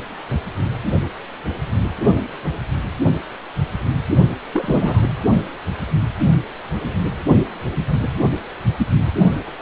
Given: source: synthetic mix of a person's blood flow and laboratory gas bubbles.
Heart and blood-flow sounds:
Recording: Doppler ultrasound of blood flow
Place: precordium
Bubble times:
4.53-5.11 s: bubbles
From the record:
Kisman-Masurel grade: 212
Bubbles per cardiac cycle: several, 3 to 8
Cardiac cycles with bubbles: 1 to 10%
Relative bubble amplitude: moderate (0.250 to 0.450)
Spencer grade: 1 (occasional bubble signal discernible with the cardiac motion signal, with majority of cardiac periods free of bubbles)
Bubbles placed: only in the low amplitude regions of the cardiac cycle

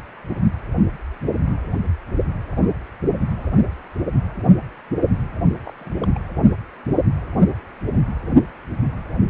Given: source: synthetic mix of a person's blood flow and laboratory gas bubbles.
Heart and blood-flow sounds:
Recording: Doppler ultrasound of blood flow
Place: precordium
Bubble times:
5.65-5.72 s: bubbles
5.77-6.08 s: bubbles
6.15-6.20 s: bubbles
From the record:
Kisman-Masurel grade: 211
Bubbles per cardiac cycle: several, 3 to 8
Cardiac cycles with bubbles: 1 to 10%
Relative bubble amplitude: barely perceptible (0.100 to 0.250)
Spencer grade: 1 (occasional bubble signal discernible with the cardiac motion signal, with majority of cardiac periods free of bubbles)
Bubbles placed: only in the low amplitude regions of the cardiac cycle

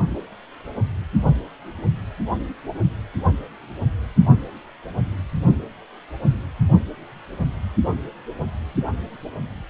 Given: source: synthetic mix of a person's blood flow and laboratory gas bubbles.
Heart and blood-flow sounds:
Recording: Doppler ultrasound of blood flow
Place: precordium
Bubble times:
no bubbles
From the record:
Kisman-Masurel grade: 000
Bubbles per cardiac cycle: 0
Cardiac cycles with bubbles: 0%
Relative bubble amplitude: no bubbles discernible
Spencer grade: 0 (complete lack of bubble signals)

